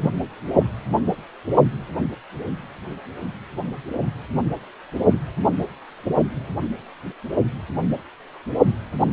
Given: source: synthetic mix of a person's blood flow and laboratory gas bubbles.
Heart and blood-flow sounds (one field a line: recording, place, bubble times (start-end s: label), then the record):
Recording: Doppler ultrasound of blood flow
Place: precordium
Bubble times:
0.01-0.12 s: bubbles
0.53-0.65 s: bubbles
From the record:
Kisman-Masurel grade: 112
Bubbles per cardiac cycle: 1 to 2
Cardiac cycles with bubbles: 1 to 10%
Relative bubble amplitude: moderate (0.250 to 0.450)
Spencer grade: 1 (occasional bubble signal discernible with the cardiac motion signal, with majority of cardiac periods free of bubbles)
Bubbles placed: anywhere in the cardiac cycle